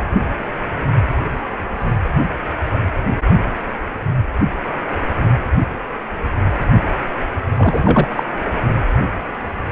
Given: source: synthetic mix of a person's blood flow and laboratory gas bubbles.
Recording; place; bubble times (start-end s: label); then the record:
Doppler ultrasound of blood flow; precordium
7.58-8.08 s: bubbles
8.15-8.23 s: bubbles
From the record:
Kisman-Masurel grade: 213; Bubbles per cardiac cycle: several, 3 to 8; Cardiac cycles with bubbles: 1 to 10%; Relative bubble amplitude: loud (0.450 to 0.775); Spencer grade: 1 (occasional bubble signal discernible with the cardiac motion signal, with majority of cardiac periods free of bubbles); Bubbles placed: anywhere in the cardiac cycle